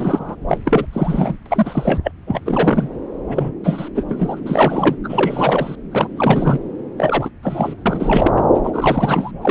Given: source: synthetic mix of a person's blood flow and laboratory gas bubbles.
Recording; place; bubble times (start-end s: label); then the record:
Doppler ultrasound of blood flow; subclavian vein
0.00-0.35 s: bubbles
0.48-0.59 s: bubbles
0.65-0.85 s: bubbles
0.93-1.37 s: bubbles
1.45-2.11 s: bubbles
2.27-2.40 s: bubbles
2.46-2.89 s: bubbles
3.27-3.51 s: bubbles
3.63-3.88 s: bubbles
3.94-4.06 s: bubbles
4.08-4.40 s: bubbles
4.46-4.96 s: bubbles
5.04-5.76 s: bubbles
5.92-6.08 s: bubbles
6.17-6.58 s: bubbles
6.98-7.30 s: bubbles
7.43-7.74 s: bubbles
7.86-8.32 s: bubbles
8.36-8.41 s: bubbles
8.54-8.61 s: bubbles
8.63-9.31 s: bubbles
9.41-9.51 s: bubbles
From the record:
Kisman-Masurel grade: 343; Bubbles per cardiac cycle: rolling drumbeat, 9 or more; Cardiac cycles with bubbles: 100%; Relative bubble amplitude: loud (0.450 to 0.775); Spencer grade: 3 (all of the cardiac periods contain showers or single bubble signals, but not dominating or overriding the cardiac motion signals); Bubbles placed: anywhere in the cardiac cycle